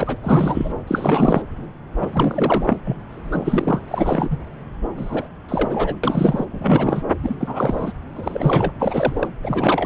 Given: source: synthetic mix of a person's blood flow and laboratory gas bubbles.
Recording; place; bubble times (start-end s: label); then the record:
Doppler ultrasound of blood flow; subclavian vein
0.00-0.17 s: bubbles
0.23-0.71 s: bubbles
0.87-1.42 s: bubbles
1.96-2.77 s: bubbles
2.84-2.96 s: bubbles
3.10-3.81 s: bubbles
3.88-4.38 s: bubbles
4.97-5.28 s: bubbles
5.49-5.96 s: bubbles
6.04-6.46 s: bubbles
6.52-7.03 s: bubbles
7.23-7.34 s: bubbles
7.40-7.93 s: bubbles
8.15-8.72 s: bubbles
8.79-9.27 s: bubbles
9.42-9.86 s: bubbles
From the record:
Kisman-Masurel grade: 342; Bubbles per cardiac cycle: rolling drumbeat, 9 or more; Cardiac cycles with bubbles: 100%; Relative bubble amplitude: moderate (0.250 to 0.450); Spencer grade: 3 (all of the cardiac periods contain showers or single bubble signals, but not dominating or overriding the cardiac motion signals); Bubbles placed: anywhere in the cardiac cycle